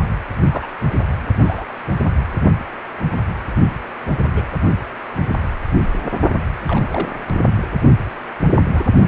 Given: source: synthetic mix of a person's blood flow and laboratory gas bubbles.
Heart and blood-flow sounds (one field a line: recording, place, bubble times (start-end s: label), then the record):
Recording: Doppler ultrasound of blood flow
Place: precordium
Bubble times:
0.50-0.67 s: bubbles
1.38-1.66 s: bubbles
4.34-4.45 s: bubbles
6.67-6.86 s: bubbles
6.90-7.16 s: bubbles
8.74-8.83 s: bubbles
From the record:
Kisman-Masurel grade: 122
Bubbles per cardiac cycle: 1 to 2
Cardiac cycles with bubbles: 10 to 50%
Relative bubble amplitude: moderate (0.250 to 0.450)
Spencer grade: 2 (many but less than half of the cardiac periods contain bubble signals, singularly or in groups)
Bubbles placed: only in the low amplitude regions of the cardiac cycle